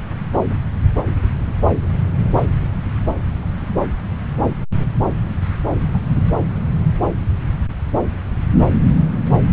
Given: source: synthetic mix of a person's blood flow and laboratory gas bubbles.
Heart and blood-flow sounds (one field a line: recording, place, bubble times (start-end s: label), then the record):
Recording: Doppler ultrasound of blood flow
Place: subclavian vein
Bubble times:
5.93-6.01 s: bubbles
6.15-6.21 s: bubbles
From the record:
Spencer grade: 1 (occasional bubble signal discernible with the cardiac motion signal, with majority of cardiac periods free of bubbles)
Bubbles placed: anywhere in the cardiac cycle